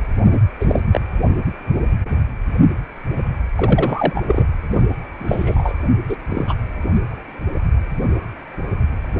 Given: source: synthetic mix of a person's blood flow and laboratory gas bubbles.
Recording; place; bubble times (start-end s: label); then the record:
Doppler ultrasound of blood flow; precordium
0.24-0.39 s: bubbles
0.60-0.79 s: bubbles
0.93-1.01 s: bubbles
3.56-4.22 s: bubbles
4.27-4.45 s: bubbles
4.73-4.82 s: bubbles
5.19-5.72 s: bubbles
6.08-6.16 s: bubbles
6.28-6.55 s: bubbles
From the record:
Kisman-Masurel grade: 222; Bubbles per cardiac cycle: several, 3 to 8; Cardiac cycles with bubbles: 10 to 50%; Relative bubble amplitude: moderate (0.250 to 0.450); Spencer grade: 2 (many but less than half of the cardiac periods contain bubble signals, singularly or in groups); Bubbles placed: anywhere in the cardiac cycle